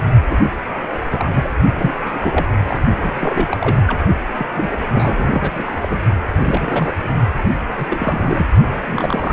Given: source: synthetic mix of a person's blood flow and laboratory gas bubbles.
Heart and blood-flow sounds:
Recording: Doppler ultrasound of blood flow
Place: precordium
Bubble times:
0.00-0.08 s: bubbles
0.29-0.38 s: bubbles
0.42-0.51 s: bubbles
0.81-1.29 s: bubbles
1.32-1.48 s: bubbles
1.78-1.94 s: bubbles
2.04-2.46 s: bubbles
2.63-2.81 s: bubbles
3.02-3.11 s: bubbles
3.14-3.84 s: bubbles
3.87-3.97 s: bubbles
4.36-4.46 s: bubbles
4.55-4.71 s: bubbles
4.91-5.50 s: bubbles
5.54-5.99 s: bubbles
6.37-6.93 s: bubbles
7.78-8.46 s: bubbles
8.85-9.33 s: bubbles
From the record:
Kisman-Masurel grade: 342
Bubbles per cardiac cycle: rolling drumbeat, 9 or more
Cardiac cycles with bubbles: 100%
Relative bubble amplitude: moderate (0.250 to 0.450)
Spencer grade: 3 (all of the cardiac periods contain showers or single bubble signals, but not dominating or overriding the cardiac motion signals)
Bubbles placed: only in the low amplitude regions of the cardiac cycle

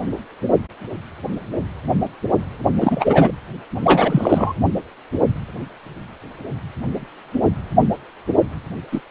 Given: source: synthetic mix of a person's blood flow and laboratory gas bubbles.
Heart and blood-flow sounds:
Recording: Doppler ultrasound of blood flow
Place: precordium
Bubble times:
2.81-3.31 s: bubbles
3.83-4.53 s: bubbles
8.92-9.01 s: bubbles
From the record:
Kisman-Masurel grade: 223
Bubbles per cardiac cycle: several, 3 to 8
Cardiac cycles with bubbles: 10 to 50%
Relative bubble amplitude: loud (0.450 to 0.775)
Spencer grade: 2 (many but less than half of the cardiac periods contain bubble signals, singularly or in groups)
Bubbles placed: anywhere in the cardiac cycle

